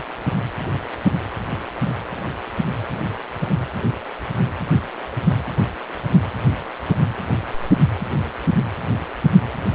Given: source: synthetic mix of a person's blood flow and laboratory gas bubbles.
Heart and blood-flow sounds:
Doppler ultrasound of blood flow; precordium
no bubbles
From the record:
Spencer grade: 0 (complete lack of bubble signals)

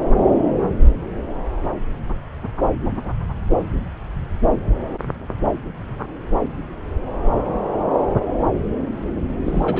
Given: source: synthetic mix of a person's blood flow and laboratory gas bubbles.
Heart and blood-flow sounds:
Doppler ultrasound of blood flow; subclavian vein
9.45-9.80 s: bubbles
From the record:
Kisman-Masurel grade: 212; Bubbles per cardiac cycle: several, 3 to 8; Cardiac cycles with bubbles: 1 to 10%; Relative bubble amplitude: moderate (0.250 to 0.450); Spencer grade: 1 (occasional bubble signal discernible with the cardiac motion signal, with majority of cardiac periods free of bubbles); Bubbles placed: anywhere in the cardiac cycle

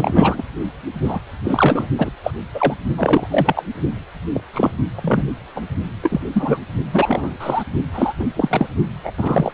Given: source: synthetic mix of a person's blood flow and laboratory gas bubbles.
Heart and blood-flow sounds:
Doppler ultrasound of blood flow; precordium
0.00-0.43 s: bubbles
1.04-1.19 s: bubbles
1.45-1.88 s: bubbles
1.98-2.11 s: bubbles
2.23-2.31 s: bubbles
2.54-2.74 s: bubbles
2.96-3.27 s: bubbles
3.30-3.64 s: bubbles
4.33-4.41 s: bubbles
4.53-4.71 s: bubbles
4.96-5.31 s: bubbles
5.55-5.62 s: bubbles
6.03-6.21 s: bubbles
6.33-6.58 s: bubbles
6.92-7.37 s: bubbles
7.40-7.64 s: bubbles
7.93-8.13 s: bubbles
8.19-8.28 s: bubbles
8.36-8.66 s: bubbles
9.03-9.11 s: bubbles
9.17-9.54 s: bubbles
From the record:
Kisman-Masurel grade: 243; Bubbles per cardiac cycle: several, 3 to 8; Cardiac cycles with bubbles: 100%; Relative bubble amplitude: loud (0.450 to 0.775); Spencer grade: 3 (all of the cardiac periods contain showers or single bubble signals, but not dominating or overriding the cardiac motion signals); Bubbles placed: only in the low amplitude regions of the cardiac cycle

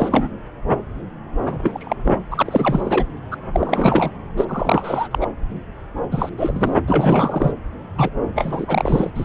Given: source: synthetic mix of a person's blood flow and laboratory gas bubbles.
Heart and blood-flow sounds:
Doppler ultrasound of blood flow; subclavian vein
0.00-0.28 s: bubbles
1.46-1.95 s: bubbles
2.05-2.20 s: bubbles
2.30-3.06 s: bubbles
3.31-3.36 s: bubbles
3.53-4.10 s: bubbles
4.36-4.45 s: bubbles
4.47-5.08 s: bubbles
5.11-5.27 s: bubbles
6.11-6.29 s: bubbles
6.37-6.79 s: bubbles
6.87-7.53 s: bubbles
7.98-8.10 s: bubbles
8.35-9.11 s: bubbles
9.15-9.25 s: bubbles
From the record:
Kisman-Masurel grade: 333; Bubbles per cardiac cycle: rolling drumbeat, 9 or more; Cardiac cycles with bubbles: 50 to 99%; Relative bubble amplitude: loud (0.450 to 0.775); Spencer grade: 3 (all of the cardiac periods contain showers or single bubble signals, but not dominating or overriding the cardiac motion signals); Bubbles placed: anywhere in the cardiac cycle

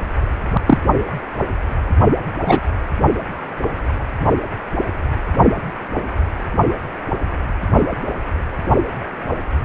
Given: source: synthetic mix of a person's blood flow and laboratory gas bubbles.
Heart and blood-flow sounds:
Doppler ultrasound of blood flow; precordium
0.66-0.78 s: bubbles
2.46-2.62 s: bubbles
From the record:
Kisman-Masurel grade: 123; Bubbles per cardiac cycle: 1 to 2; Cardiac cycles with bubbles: 10 to 50%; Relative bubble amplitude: loud (0.450 to 0.775); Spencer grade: 2 (many but less than half of the cardiac periods contain bubble signals, singularly or in groups); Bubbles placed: anywhere in the cardiac cycle

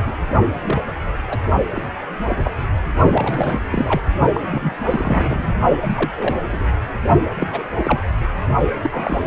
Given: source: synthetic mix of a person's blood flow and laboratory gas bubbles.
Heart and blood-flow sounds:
Doppler ultrasound of blood flow; precordium
0.06-0.16 s: bubbles
0.61-0.81 s: bubbles
0.88-0.93 s: bubbles
1.29-1.40 s: bubbles
1.74-1.83 s: bubbles
2.29-2.39 s: bubbles
2.43-2.52 s: bubbles
3.12-3.60 s: bubbles
3.71-4.02 s: bubbles
4.34-4.40 s: bubbles
4.51-4.73 s: bubbles
4.85-5.50 s: bubbles
5.83-6.11 s: bubbles
6.16-6.38 s: bubbles
6.45-6.66 s: bubbles
7.35-7.47 s: bubbles
7.52-7.67 s: bubbles
7.77-8.01 s: bubbles
8.81-9.27 s: bubbles
From the record:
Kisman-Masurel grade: 242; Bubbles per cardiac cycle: several, 3 to 8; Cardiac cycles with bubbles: 100%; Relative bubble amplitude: moderate (0.250 to 0.450); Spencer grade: 3 (all of the cardiac periods contain showers or single bubble signals, but not dominating or overriding the cardiac motion signals); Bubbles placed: only in the low amplitude regions of the cardiac cycle

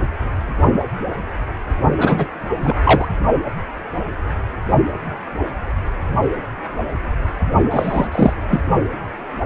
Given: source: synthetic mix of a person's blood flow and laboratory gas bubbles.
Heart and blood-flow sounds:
Doppler ultrasound of blood flow; precordium
1.97-2.28 s: bubbles
2.62-2.74 s: bubbles
2.83-3.08 s: bubbles
7.71-8.07 s: bubbles
8.12-8.33 s: bubbles
8.47-8.59 s: bubbles
From the record:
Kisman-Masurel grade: 223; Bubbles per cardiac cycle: several, 3 to 8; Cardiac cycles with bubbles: 10 to 50%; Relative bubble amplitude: loud (0.450 to 0.775); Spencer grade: 2 (many but less than half of the cardiac periods contain bubble signals, singularly or in groups); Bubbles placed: only in the low amplitude regions of the cardiac cycle

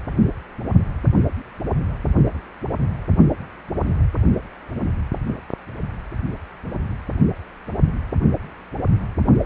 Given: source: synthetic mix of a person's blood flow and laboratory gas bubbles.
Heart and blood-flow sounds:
Doppler ultrasound of blood flow; precordium
no bubbles
From the record:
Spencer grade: 0 (complete lack of bubble signals)

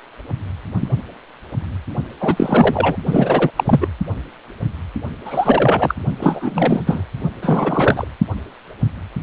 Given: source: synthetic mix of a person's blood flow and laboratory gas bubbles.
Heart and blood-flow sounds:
Doppler ultrasound of blood flow; precordium
2.20-2.96 s: bubbles
3.05-3.51 s: bubbles
3.56-3.88 s: bubbles
5.25-5.95 s: bubbles
6.19-7.03 s: bubbles
7.41-8.08 s: bubbles
From the record:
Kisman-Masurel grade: 333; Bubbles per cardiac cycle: rolling drumbeat, 9 or more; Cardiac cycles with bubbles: 50 to 99%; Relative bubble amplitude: loud (0.450 to 0.775); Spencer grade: 3 (all of the cardiac periods contain showers or single bubble signals, but not dominating or overriding the cardiac motion signals); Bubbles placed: only in the low amplitude regions of the cardiac cycle

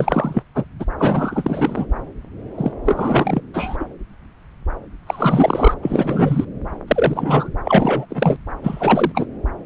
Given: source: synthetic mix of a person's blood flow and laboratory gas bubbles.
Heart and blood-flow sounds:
Doppler ultrasound of blood flow; subclavian vein
0.00-0.42 s: bubbles
0.54-0.65 s: bubbles
0.79-0.85 s: bubbles
0.98-1.86 s: bubbles
2.57-2.72 s: bubbles
2.85-3.40 s: bubbles
3.54-3.85 s: bubbles
5.07-5.74 s: bubbles
5.82-6.45 s: bubbles
6.88-7.50 s: bubbles
7.65-8.05 s: bubbles
8.09-8.37 s: bubbles
8.63-9.26 s: bubbles
From the record:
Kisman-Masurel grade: 333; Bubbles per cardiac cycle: rolling drumbeat, 9 or more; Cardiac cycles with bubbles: 50 to 99%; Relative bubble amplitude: loud (0.450 to 0.775); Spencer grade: 3 (all of the cardiac periods contain showers or single bubble signals, but not dominating or overriding the cardiac motion signals); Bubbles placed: anywhere in the cardiac cycle

